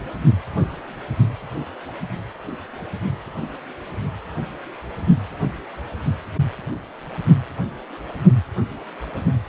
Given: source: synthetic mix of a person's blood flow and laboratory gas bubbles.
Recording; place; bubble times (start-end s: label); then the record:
Doppler ultrasound of blood flow; precordium
no bubbles
From the record:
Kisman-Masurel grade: 000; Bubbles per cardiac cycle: 0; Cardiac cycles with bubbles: 0%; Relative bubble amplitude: no bubbles discernible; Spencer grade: 0 (complete lack of bubble signals)